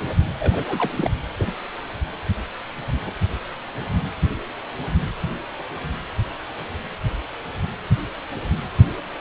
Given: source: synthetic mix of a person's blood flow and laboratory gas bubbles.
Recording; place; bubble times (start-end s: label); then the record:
Doppler ultrasound of blood flow; precordium
0.39-0.65 s: bubbles
0.68-1.12 s: bubbles
1.38-1.54 s: bubbles
From the record:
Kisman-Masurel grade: 211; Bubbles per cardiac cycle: several, 3 to 8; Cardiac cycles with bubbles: 1 to 10%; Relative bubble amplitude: barely perceptible (0.100 to 0.250); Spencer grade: 1 (occasional bubble signal discernible with the cardiac motion signal, with majority of cardiac periods free of bubbles); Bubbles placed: anywhere in the cardiac cycle